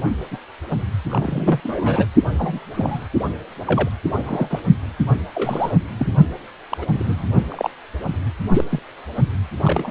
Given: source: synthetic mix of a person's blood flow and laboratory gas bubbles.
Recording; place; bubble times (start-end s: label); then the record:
Doppler ultrasound of blood flow; precordium
0.31-0.39 s: bubbles
1.09-1.60 s: bubbles
1.63-2.06 s: bubbles
2.38-2.60 s: bubbles
2.73-3.08 s: bubbles
3.67-3.90 s: bubbles
4.15-4.60 s: bubbles
5.35-5.79 s: bubbles
5.98-6.13 s: bubbles
6.71-6.78 s: bubbles
6.81-6.86 s: bubbles
6.93-7.27 s: bubbles
7.49-7.70 s: bubbles
8.53-8.64 s: bubbles
8.71-8.79 s: bubbles
9.62-9.91 s: bubbles
From the record:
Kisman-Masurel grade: 232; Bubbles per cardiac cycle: several, 3 to 8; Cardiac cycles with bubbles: 50 to 99%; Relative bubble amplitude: moderate (0.250 to 0.450); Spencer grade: 3 (all of the cardiac periods contain showers or single bubble signals, but not dominating or overriding the cardiac motion signals); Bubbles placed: only in the low amplitude regions of the cardiac cycle